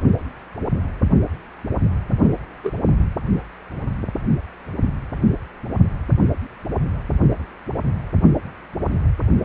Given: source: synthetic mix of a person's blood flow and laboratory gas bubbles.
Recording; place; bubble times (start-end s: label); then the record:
Doppler ultrasound of blood flow; precordium
2.23-2.39 s: bubbles
2.63-2.71 s: bubbles
From the record:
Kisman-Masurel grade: 122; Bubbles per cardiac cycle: 1 to 2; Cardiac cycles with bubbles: 10 to 50%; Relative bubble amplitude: moderate (0.250 to 0.450); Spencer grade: 2 (many but less than half of the cardiac periods contain bubble signals, singularly or in groups); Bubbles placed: anywhere in the cardiac cycle